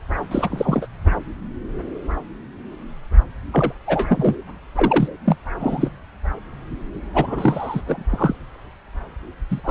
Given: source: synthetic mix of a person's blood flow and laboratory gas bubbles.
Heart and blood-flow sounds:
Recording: Doppler ultrasound of blood flow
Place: subclavian vein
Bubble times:
0.31-0.86 s: bubbles
1.05-1.11 s: bubbles
3.52-3.73 s: bubbles
3.87-4.37 s: bubbles
4.75-5.08 s: bubbles
5.25-5.37 s: bubbles
5.59-5.91 s: bubbles
7.13-7.82 s: bubbles
7.85-8.05 s: bubbles
8.10-8.36 s: bubbles
9.50-9.71 s: bubbles
From the record:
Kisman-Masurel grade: 223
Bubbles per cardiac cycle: several, 3 to 8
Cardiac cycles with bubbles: 10 to 50%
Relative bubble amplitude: loud (0.450 to 0.775)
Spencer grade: 2 (many but less than half of the cardiac periods contain bubble signals, singularly or in groups)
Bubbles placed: anywhere in the cardiac cycle

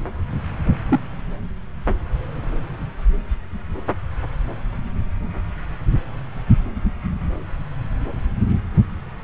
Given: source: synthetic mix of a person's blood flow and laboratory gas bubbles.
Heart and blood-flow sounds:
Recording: Doppler ultrasound of blood flow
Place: subclavian vein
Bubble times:
0.89-1.00 s: bubbles
From the record:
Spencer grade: 1 (occasional bubble signal discernible with the cardiac motion signal, with majority of cardiac periods free of bubbles)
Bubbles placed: anywhere in the cardiac cycle

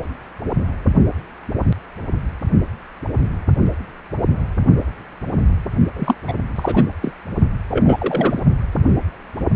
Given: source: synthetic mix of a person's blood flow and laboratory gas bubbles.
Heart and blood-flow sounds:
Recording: Doppler ultrasound of blood flow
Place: precordium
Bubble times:
5.96-6.15 s: bubbles
6.28-6.33 s: bubbles
6.56-6.85 s: bubbles
7.02-7.14 s: bubbles
7.71-8.39 s: bubbles
From the record:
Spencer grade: 2 (many but less than half of the cardiac periods contain bubble signals, singularly or in groups)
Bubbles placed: only in the low amplitude regions of the cardiac cycle

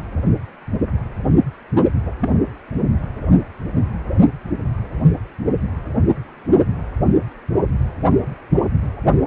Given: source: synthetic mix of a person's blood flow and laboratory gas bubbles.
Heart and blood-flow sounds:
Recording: Doppler ultrasound of blood flow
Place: precordium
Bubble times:
2.05-2.12 s: bubbles
2.21-2.29 s: bubbles
From the record:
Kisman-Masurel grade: 112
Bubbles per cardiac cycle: 1 to 2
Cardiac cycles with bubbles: 1 to 10%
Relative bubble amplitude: moderate (0.250 to 0.450)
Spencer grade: 1 (occasional bubble signal discernible with the cardiac motion signal, with majority of cardiac periods free of bubbles)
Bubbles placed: only in the low amplitude regions of the cardiac cycle

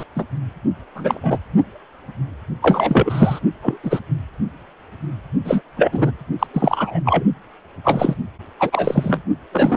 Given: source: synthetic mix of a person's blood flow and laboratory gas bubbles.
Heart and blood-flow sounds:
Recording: Doppler ultrasound of blood flow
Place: precordium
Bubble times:
0.00-0.04 s: bubbles
0.16-0.25 s: bubbles
0.95-1.38 s: bubbles
2.61-3.40 s: bubbles
3.62-3.77 s: bubbles
3.83-4.00 s: bubbles
5.45-5.61 s: bubbles
5.76-6.11 s: bubbles
6.39-6.47 s: bubbles
6.53-7.00 s: bubbles
7.04-7.24 s: bubbles
7.84-8.15 s: bubbles
8.59-9.21 s: bubbles
9.52-9.76 s: bubbles
From the record:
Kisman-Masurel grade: 233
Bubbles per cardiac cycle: several, 3 to 8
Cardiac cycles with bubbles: 50 to 99%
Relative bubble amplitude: loud (0.450 to 0.775)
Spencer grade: 3 (all of the cardiac periods contain showers or single bubble signals, but not dominating or overriding the cardiac motion signals)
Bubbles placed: only in the low amplitude regions of the cardiac cycle

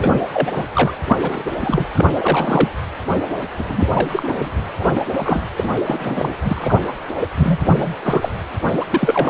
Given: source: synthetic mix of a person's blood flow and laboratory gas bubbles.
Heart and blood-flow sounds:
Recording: Doppler ultrasound of blood flow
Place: precordium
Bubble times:
0.00-0.19 s: bubbles
0.33-0.65 s: bubbles
0.73-0.94 s: bubbles
1.07-1.17 s: bubbles
1.22-1.51 s: bubbles
1.59-1.87 s: bubbles
1.94-2.05 s: bubbles
2.19-2.69 s: bubbles
3.58-3.65 s: bubbles
3.69-3.90 s: bubbles
3.94-4.50 s: bubbles
4.78-4.86 s: bubbles
4.95-5.00 s: bubbles
5.13-5.47 s: bubbles
5.56-5.68 s: bubbles
5.86-6.29 s: bubbles
6.44-6.82 s: bubbles
7.35-7.58 s: bubbles
7.67-7.96 s: bubbles
8.03-8.29 s: bubbles
8.67-8.85 s: bubbles
8.91-9.30 s: bubbles
From the record:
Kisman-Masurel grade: 343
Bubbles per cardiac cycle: rolling drumbeat, 9 or more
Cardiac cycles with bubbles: 100%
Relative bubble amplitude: loud (0.450 to 0.775)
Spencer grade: 3 (all of the cardiac periods contain showers or single bubble signals, but not dominating or overriding the cardiac motion signals)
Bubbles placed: anywhere in the cardiac cycle

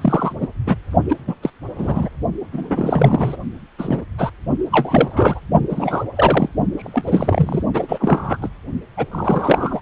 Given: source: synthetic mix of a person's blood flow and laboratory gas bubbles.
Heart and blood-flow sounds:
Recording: Doppler ultrasound of blood flow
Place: precordium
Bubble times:
0.01-0.32 s: bubbles
0.40-0.48 s: bubbles
0.66-0.76 s: bubbles
1.09-1.17 s: bubbles
1.27-1.34 s: bubbles
1.43-1.50 s: bubbles
1.77-2.09 s: bubbles
2.51-3.36 s: bubbles
3.78-4.05 s: bubbles
4.18-4.31 s: bubbles
4.71-5.41 s: bubbles
5.70-6.04 s: bubbles
6.16-6.50 s: bubbles
6.77-7.63 s: bubbles
7.73-8.37 s: bubbles
8.41-8.48 s: bubbles
8.97-9.05 s: bubbles
9.11-9.80 s: bubbles
From the record:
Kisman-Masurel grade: 243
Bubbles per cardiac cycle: several, 3 to 8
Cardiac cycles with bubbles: 100%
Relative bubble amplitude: loud (0.450 to 0.775)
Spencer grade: 3 (all of the cardiac periods contain showers or single bubble signals, but not dominating or overriding the cardiac motion signals)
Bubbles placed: only in the low amplitude regions of the cardiac cycle

